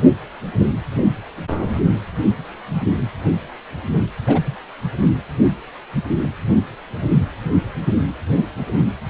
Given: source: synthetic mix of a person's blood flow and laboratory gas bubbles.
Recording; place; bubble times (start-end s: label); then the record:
Doppler ultrasound of blood flow; precordium
1.48-1.66 s: bubbles
3.94-4.05 s: bubbles
4.26-4.41 s: bubbles
4.45-4.56 s: bubbles
From the record:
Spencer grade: 2 (many but less than half of the cardiac periods contain bubble signals, singularly or in groups); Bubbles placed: anywhere in the cardiac cycle